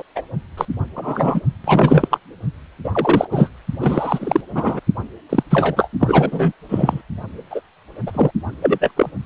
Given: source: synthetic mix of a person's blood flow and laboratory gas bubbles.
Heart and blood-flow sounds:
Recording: Doppler ultrasound of blood flow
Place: precordium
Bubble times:
0.00-0.03 s: bubbles
0.16-0.22 s: bubbles
0.57-0.65 s: bubbles
0.95-1.41 s: bubbles
1.64-2.08 s: bubbles
2.10-2.18 s: bubbles
2.84-3.28 s: bubbles
3.31-3.50 s: bubbles
3.79-4.41 s: bubbles
4.54-4.80 s: bubbles
5.29-5.43 s: bubbles
5.50-5.89 s: bubbles
6.00-6.52 s: bubbles
6.69-7.02 s: bubbles
7.50-7.61 s: bubbles
8.06-8.31 s: bubbles
8.61-8.78 s: bubbles
8.80-8.91 s: bubbles
8.96-9.09 s: bubbles
From the record:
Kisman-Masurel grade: 243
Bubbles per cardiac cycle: several, 3 to 8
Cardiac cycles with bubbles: 100%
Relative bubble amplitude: loud (0.450 to 0.775)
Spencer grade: 3 (all of the cardiac periods contain showers or single bubble signals, but not dominating or overriding the cardiac motion signals)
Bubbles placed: only in the low amplitude regions of the cardiac cycle

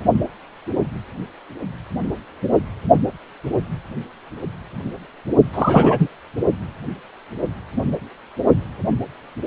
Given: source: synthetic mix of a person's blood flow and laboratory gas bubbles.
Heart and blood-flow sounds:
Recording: Doppler ultrasound of blood flow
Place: precordium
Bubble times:
5.53-6.08 s: bubbles
From the record:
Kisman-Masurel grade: 213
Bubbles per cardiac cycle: several, 3 to 8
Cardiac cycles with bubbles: 1 to 10%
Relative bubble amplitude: loud (0.450 to 0.775)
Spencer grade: 1 (occasional bubble signal discernible with the cardiac motion signal, with majority of cardiac periods free of bubbles)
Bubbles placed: only in the low amplitude regions of the cardiac cycle

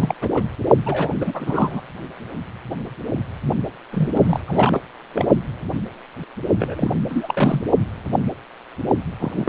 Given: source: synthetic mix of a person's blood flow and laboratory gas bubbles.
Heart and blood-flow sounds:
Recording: Doppler ultrasound of blood flow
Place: precordium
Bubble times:
0.00-0.14 s: bubbles
0.21-0.30 s: bubbles
0.36-0.42 s: bubbles
0.86-1.09 s: bubbles
1.12-1.81 s: bubbles
3.92-4.09 s: bubbles
4.14-4.40 s: bubbles
4.47-4.80 s: bubbles
5.13-5.25 s: bubbles
6.59-6.91 s: bubbles
7.08-7.71 s: bubbles
9.20-9.49 s: bubbles
From the record:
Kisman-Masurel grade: 332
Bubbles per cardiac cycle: rolling drumbeat, 9 or more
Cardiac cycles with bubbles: 50 to 99%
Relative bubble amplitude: moderate (0.250 to 0.450)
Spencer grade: 3 (all of the cardiac periods contain showers or single bubble signals, but not dominating or overriding the cardiac motion signals)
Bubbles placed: only in the low amplitude regions of the cardiac cycle

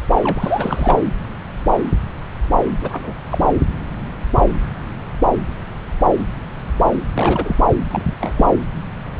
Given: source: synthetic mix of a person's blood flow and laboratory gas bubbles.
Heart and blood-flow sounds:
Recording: Doppler ultrasound of blood flow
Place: subclavian vein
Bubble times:
0.22-0.99 s: bubbles
2.81-3.13 s: bubbles
3.31-3.38 s: bubbles
7.14-7.56 s: bubbles
7.90-8.18 s: bubbles
8.20-8.46 s: bubbles
From the record:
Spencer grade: 2 (many but less than half of the cardiac periods contain bubble signals, singularly or in groups)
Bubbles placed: anywhere in the cardiac cycle

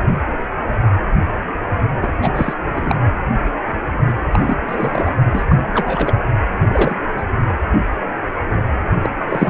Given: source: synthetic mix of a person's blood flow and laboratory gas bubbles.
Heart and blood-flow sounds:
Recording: Doppler ultrasound of blood flow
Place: precordium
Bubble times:
2.02-2.08 s: bubbles
2.21-2.54 s: bubbles
2.75-3.00 s: bubbles
4.31-4.39 s: bubbles
4.46-4.58 s: bubbles
4.67-5.12 s: bubbles
5.32-5.44 s: bubbles
5.49-5.57 s: bubbles
5.73-6.18 s: bubbles
6.69-6.94 s: bubbles
7.17-7.23 s: bubbles
9.02-9.10 s: bubbles
9.29-9.50 s: bubbles
From the record:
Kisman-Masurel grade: 233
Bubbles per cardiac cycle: several, 3 to 8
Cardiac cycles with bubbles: 50 to 99%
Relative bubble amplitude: loud (0.450 to 0.775)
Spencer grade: 3 (all of the cardiac periods contain showers or single bubble signals, but not dominating or overriding the cardiac motion signals)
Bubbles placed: anywhere in the cardiac cycle

